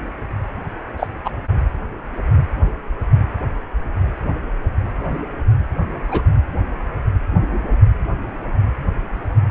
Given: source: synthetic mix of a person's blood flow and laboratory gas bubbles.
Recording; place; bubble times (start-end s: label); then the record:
Doppler ultrasound of blood flow; precordium
0.97-1.07 s: bubbles
1.24-1.30 s: bubbles
6.08-6.29 s: bubbles
From the record:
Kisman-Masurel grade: 123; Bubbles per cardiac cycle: 1 to 2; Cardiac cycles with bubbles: 10 to 50%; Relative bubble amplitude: loud (0.450 to 0.775); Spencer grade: 2 (many but less than half of the cardiac periods contain bubble signals, singularly or in groups); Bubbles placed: anywhere in the cardiac cycle